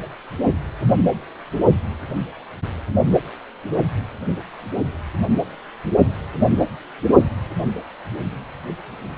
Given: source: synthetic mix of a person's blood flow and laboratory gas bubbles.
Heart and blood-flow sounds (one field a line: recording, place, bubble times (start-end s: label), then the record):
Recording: Doppler ultrasound of blood flow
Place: precordium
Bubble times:
no bubbles
From the record:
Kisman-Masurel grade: 000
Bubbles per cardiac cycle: 0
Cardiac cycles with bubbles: 0%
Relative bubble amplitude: no bubbles discernible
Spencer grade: 0 (complete lack of bubble signals)